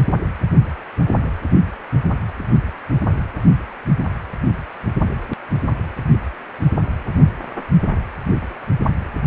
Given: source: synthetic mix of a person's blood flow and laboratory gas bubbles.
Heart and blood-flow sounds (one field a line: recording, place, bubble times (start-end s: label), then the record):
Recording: Doppler ultrasound of blood flow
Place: precordium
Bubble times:
1.24-1.30 s: bubbles
From the record:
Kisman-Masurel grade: 121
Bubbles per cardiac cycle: 1 to 2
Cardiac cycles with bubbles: 10 to 50%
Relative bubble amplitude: barely perceptible (0.100 to 0.250)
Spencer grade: 2 (many but less than half of the cardiac periods contain bubble signals, singularly or in groups)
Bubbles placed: only in the low amplitude regions of the cardiac cycle